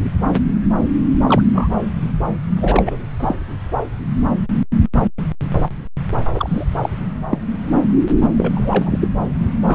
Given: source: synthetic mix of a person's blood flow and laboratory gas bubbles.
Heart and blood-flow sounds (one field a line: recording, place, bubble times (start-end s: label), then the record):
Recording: Doppler ultrasound of blood flow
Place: subclavian vein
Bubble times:
1.27-1.46 s: bubbles
1.53-1.69 s: bubbles
2.00-2.10 s: bubbles
2.60-2.98 s: bubbles
3.19-3.35 s: bubbles
6.34-6.65 s: bubbles
6.83-6.89 s: bubbles
7.31-7.38 s: bubbles
8.37-9.08 s: bubbles
9.66-9.75 s: bubbles
From the record:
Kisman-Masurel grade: 232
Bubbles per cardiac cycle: several, 3 to 8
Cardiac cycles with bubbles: 50 to 99%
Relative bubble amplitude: moderate (0.250 to 0.450)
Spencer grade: 3 (all of the cardiac periods contain showers or single bubble signals, but not dominating or overriding the cardiac motion signals)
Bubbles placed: anywhere in the cardiac cycle